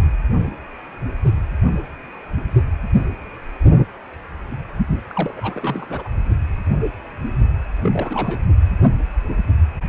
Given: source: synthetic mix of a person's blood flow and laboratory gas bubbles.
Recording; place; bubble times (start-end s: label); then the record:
Doppler ultrasound of blood flow; precordium
5.08-5.34 s: bubbles
5.37-5.86 s: bubbles
5.90-6.08 s: bubbles
7.82-8.39 s: bubbles
From the record:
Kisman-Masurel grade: 221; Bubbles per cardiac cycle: several, 3 to 8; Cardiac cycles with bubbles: 10 to 50%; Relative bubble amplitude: barely perceptible (0.100 to 0.250); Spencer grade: 2 (many but less than half of the cardiac periods contain bubble signals, singularly or in groups); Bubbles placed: only in the low amplitude regions of the cardiac cycle